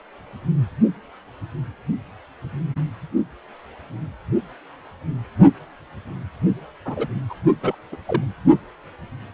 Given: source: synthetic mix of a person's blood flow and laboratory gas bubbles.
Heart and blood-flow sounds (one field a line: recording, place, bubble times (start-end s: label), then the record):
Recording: Doppler ultrasound of blood flow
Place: precordium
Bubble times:
6.85-7.06 s: bubbles
7.29-7.34 s: bubbles
7.62-7.75 s: bubbles
7.92-7.96 s: bubbles
8.06-8.24 s: bubbles
From the record:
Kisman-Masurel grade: 212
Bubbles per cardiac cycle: several, 3 to 8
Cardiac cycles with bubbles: 1 to 10%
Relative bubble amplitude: moderate (0.250 to 0.450)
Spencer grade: 1 (occasional bubble signal discernible with the cardiac motion signal, with majority of cardiac periods free of bubbles)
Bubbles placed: only in the low amplitude regions of the cardiac cycle